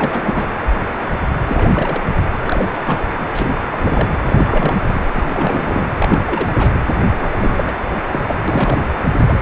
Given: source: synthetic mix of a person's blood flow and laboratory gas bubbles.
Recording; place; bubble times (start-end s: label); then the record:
Doppler ultrasound of blood flow; precordium
0.00-0.52 s: bubbles
1.46-2.04 s: bubbles
2.44-3.04 s: bubbles
3.18-3.25 s: bubbles
3.31-3.51 s: bubbles
3.72-4.09 s: bubbles
4.27-4.77 s: bubbles
4.86-5.07 s: bubbles
5.15-5.87 s: bubbles
5.99-6.23 s: bubbles
6.25-6.53 s: bubbles
6.57-6.79 s: bubbles
7.19-7.74 s: bubbles
8.07-8.20 s: bubbles
8.26-8.35 s: bubbles
8.47-8.91 s: bubbles
9.27-9.42 s: bubbles
From the record:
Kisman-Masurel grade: 332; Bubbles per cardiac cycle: rolling drumbeat, 9 or more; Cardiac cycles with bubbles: 50 to 99%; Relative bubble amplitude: moderate (0.250 to 0.450); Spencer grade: 3 (all of the cardiac periods contain showers or single bubble signals, but not dominating or overriding the cardiac motion signals); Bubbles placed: anywhere in the cardiac cycle